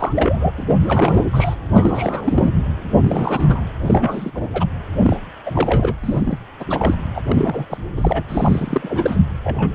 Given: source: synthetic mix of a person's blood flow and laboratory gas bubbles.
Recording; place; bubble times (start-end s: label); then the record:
Doppler ultrasound of blood flow; precordium
0.00-0.51 s: bubbles
0.57-0.75 s: bubbles
0.82-1.25 s: bubbles
1.32-1.55 s: bubbles
1.74-2.52 s: bubbles
3.01-3.65 s: bubbles
3.82-4.31 s: bubbles
4.34-4.48 s: bubbles
4.52-4.66 s: bubbles
4.99-5.17 s: bubbles
5.46-5.95 s: bubbles
6.03-6.38 s: bubbles
6.59-6.64 s: bubbles
6.67-6.96 s: bubbles
7.15-7.21 s: bubbles
7.26-7.77 s: bubbles
7.96-8.23 s: bubbles
8.29-9.19 s: bubbles
9.44-9.71 s: bubbles
From the record:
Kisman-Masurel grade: 342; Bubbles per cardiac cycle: rolling drumbeat, 9 or more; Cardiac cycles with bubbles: 100%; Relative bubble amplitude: moderate (0.250 to 0.450); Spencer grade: 3 (all of the cardiac periods contain showers or single bubble signals, but not dominating or overriding the cardiac motion signals); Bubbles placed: anywhere in the cardiac cycle